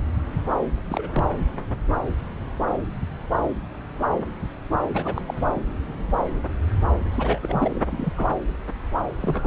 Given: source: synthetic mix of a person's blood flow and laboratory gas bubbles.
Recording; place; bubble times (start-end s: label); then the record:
Doppler ultrasound of blood flow; subclavian vein
0.85-1.09 s: bubbles
1.12-1.25 s: bubbles
4.93-5.22 s: bubbles
5.27-5.34 s: bubbles
5.37-5.44 s: bubbles
5.54-5.63 s: bubbles
7.11-7.80 s: bubbles
7.90-8.12 s: bubbles
8.16-8.28 s: bubbles
9.22-9.46 s: bubbles
From the record:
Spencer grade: 2 (many but less than half of the cardiac periods contain bubble signals, singularly or in groups); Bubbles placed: anywhere in the cardiac cycle